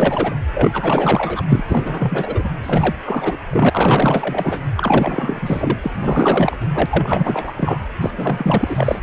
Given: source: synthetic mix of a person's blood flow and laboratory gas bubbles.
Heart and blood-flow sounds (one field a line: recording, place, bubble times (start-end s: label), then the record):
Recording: Doppler ultrasound of blood flow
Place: precordium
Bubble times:
0.00-0.35 s: bubbles
0.53-1.43 s: bubbles
1.48-1.64 s: bubbles
1.68-2.50 s: bubbles
2.63-2.96 s: bubbles
3.05-3.38 s: bubbles
3.50-4.61 s: bubbles
4.75-5.78 s: bubbles
5.82-6.57 s: bubbles
6.61-6.67 s: bubbles
6.74-6.86 s: bubbles
6.89-7.54 s: bubbles
7.57-7.81 s: bubbles
8.01-8.11 s: bubbles
8.15-8.99 s: bubbles
From the record:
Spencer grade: 4 (maximum detectable bubble signal sounding continuously throughout systole and diastole of every cardiac period, and overriding the amplitude of the normal cardiac signals)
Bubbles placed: anywhere in the cardiac cycle